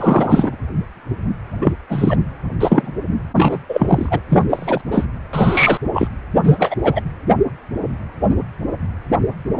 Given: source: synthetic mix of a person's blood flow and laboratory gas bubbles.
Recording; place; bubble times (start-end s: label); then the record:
Doppler ultrasound of blood flow; precordium
0.00-0.56 s: bubbles
1.61-1.72 s: bubbles
1.89-2.17 s: bubbles
2.60-2.91 s: bubbles
3.35-3.58 s: bubbles
3.69-4.20 s: bubbles
4.30-4.43 s: bubbles
4.49-4.81 s: bubbles
4.91-5.05 s: bubbles
5.33-5.78 s: bubbles
5.93-6.08 s: bubbles
6.43-6.75 s: bubbles
6.83-7.01 s: bubbles
From the record:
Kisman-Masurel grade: 233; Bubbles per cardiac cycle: several, 3 to 8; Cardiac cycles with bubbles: 50 to 99%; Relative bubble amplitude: loud (0.450 to 0.775); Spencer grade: 3 (all of the cardiac periods contain showers or single bubble signals, but not dominating or overriding the cardiac motion signals); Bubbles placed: anywhere in the cardiac cycle